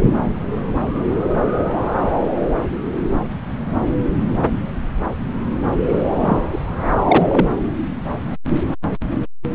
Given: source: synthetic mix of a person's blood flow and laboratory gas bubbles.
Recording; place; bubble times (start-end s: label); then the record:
Doppler ultrasound of blood flow; subclavian vein
5.88-6.00 s: bubbles
6.20-6.42 s: bubbles
6.52-6.58 s: bubbles
7.08-7.46 s: bubbles
From the record:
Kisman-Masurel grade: 213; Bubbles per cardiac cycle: several, 3 to 8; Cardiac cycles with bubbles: 1 to 10%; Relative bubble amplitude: loud (0.450 to 0.775); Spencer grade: 1 (occasional bubble signal discernible with the cardiac motion signal, with majority of cardiac periods free of bubbles); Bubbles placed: anywhere in the cardiac cycle